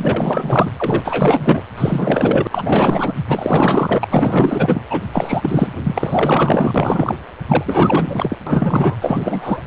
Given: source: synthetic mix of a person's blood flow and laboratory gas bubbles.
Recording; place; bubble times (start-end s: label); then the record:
Doppler ultrasound of blood flow; precordium
0.00-0.70 s: bubbles
0.77-1.61 s: bubbles
1.77-2.47 s: bubbles
2.50-3.12 s: bubbles
3.27-4.06 s: bubbles
4.09-4.80 s: bubbles
4.89-5.01 s: bubbles
5.13-5.73 s: bubbles
5.84-7.17 s: bubbles
7.49-8.37 s: bubbles
8.47-8.95 s: bubbles
9.01-9.64 s: bubbles
From the record:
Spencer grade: 4 (maximum detectable bubble signal sounding continuously throughout systole and diastole of every cardiac period, and overriding the amplitude of the normal cardiac signals); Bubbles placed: anywhere in the cardiac cycle